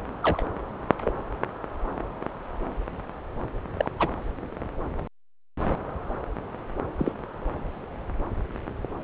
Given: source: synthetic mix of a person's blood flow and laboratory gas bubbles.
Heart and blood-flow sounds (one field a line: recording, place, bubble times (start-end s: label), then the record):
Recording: Doppler ultrasound of blood flow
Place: subclavian vein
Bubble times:
0.23-0.47 s: bubbles
1.04-1.13 s: bubbles
3.77-3.90 s: bubbles
3.99-4.12 s: bubbles
6.99-7.12 s: bubbles
From the record:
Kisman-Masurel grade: 122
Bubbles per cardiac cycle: 1 to 2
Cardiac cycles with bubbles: 10 to 50%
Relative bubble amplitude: moderate (0.250 to 0.450)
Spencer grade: 2 (many but less than half of the cardiac periods contain bubble signals, singularly or in groups)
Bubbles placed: anywhere in the cardiac cycle